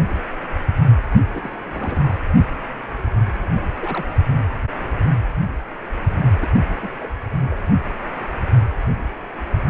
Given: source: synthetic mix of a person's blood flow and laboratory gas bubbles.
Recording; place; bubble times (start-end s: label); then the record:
Doppler ultrasound of blood flow; precordium
1.34-1.55 s: bubbles
1.71-2.19 s: bubbles
3.75-3.78 s: bubbles
3.81-4.05 s: bubbles
6.42-6.47 s: bubbles
6.82-6.89 s: bubbles
7.00-7.12 s: bubbles
7.31-7.68 s: bubbles
From the record:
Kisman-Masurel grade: 221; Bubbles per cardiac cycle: several, 3 to 8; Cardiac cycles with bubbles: 10 to 50%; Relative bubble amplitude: barely perceptible (0.100 to 0.250); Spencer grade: 2 (many but less than half of the cardiac periods contain bubble signals, singularly or in groups); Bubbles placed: anywhere in the cardiac cycle